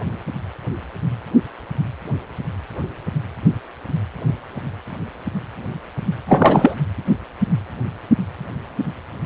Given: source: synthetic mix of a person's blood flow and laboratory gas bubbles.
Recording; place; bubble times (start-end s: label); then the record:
Doppler ultrasound of blood flow; precordium
6.27-6.75 s: bubbles
From the record:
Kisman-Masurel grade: 213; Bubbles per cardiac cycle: several, 3 to 8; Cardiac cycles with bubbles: 1 to 10%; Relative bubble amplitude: loud (0.450 to 0.775); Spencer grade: 1 (occasional bubble signal discernible with the cardiac motion signal, with majority of cardiac periods free of bubbles); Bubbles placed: anywhere in the cardiac cycle